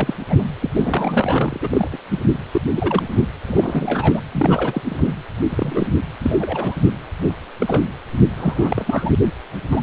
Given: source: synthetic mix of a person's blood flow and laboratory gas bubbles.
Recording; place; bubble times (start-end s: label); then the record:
Doppler ultrasound of blood flow; precordium
0.00-0.14 s: bubbles
0.28-0.43 s: bubbles
0.61-0.69 s: bubbles
0.74-1.59 s: bubbles
1.62-1.88 s: bubbles
1.92-1.97 s: bubbles
2.11-2.19 s: bubbles
2.52-2.61 s: bubbles
2.75-3.27 s: bubbles
3.48-4.20 s: bubbles
4.32-4.83 s: bubbles
4.89-5.12 s: bubbles
5.49-5.88 s: bubbles
6.22-6.75 s: bubbles
6.82-6.94 s: bubbles
7.19-7.32 s: bubbles
7.60-7.85 s: bubbles
8.37-9.11 s: bubbles
9.71-9.81 s: bubbles
From the record:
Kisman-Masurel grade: 242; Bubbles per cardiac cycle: several, 3 to 8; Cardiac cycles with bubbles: 100%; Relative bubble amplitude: moderate (0.250 to 0.450); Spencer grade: 3 (all of the cardiac periods contain showers or single bubble signals, but not dominating or overriding the cardiac motion signals); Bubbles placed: anywhere in the cardiac cycle